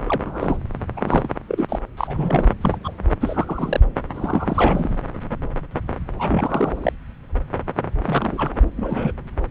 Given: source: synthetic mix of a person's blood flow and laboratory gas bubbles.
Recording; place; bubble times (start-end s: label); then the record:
Doppler ultrasound of blood flow; subclavian vein
0.05-0.57 s: bubbles
0.97-1.29 s: bubbles
1.49-1.79 s: bubbles
1.97-2.53 s: bubbles
2.61-2.78 s: bubbles
2.84-2.92 s: bubbles
3.20-3.80 s: bubbles
4.15-5.02 s: bubbles
6.19-6.92 s: bubbles
8.05-8.57 s: bubbles
8.77-9.12 s: bubbles
From the record:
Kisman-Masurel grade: 232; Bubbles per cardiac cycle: several, 3 to 8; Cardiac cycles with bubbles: 50 to 99%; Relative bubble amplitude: moderate (0.250 to 0.450); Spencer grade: 3 (all of the cardiac periods contain showers or single bubble signals, but not dominating or overriding the cardiac motion signals); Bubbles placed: anywhere in the cardiac cycle